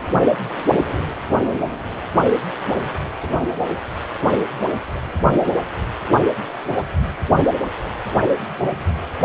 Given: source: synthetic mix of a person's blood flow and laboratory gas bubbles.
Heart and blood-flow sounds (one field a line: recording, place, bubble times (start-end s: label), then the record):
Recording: Doppler ultrasound of blood flow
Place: precordium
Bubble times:
2.58-2.98 s: bubbles
3.03-3.10 s: bubbles
3.20-3.30 s: bubbles
From the record:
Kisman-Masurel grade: 211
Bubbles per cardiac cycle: several, 3 to 8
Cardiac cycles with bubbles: 1 to 10%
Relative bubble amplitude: barely perceptible (0.100 to 0.250)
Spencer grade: 1 (occasional bubble signal discernible with the cardiac motion signal, with majority of cardiac periods free of bubbles)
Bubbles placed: only in the low amplitude regions of the cardiac cycle